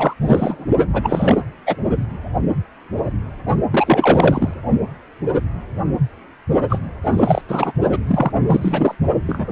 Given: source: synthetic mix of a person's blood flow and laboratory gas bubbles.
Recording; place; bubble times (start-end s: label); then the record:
Doppler ultrasound of blood flow; precordium
0.00-0.14 s: bubbles
0.22-0.66 s: bubbles
0.93-1.42 s: bubbles
1.66-1.76 s: bubbles
3.71-4.54 s: bubbles
6.70-6.79 s: bubbles
7.02-7.42 s: bubbles
7.48-7.72 s: bubbles
7.92-7.99 s: bubbles
8.07-8.32 s: bubbles
8.47-8.95 s: bubbles
9.27-9.52 s: bubbles
From the record:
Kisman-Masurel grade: 333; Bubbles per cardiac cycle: rolling drumbeat, 9 or more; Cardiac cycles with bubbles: 50 to 99%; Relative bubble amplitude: loud (0.450 to 0.775); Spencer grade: 3 (all of the cardiac periods contain showers or single bubble signals, but not dominating or overriding the cardiac motion signals); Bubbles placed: only in the low amplitude regions of the cardiac cycle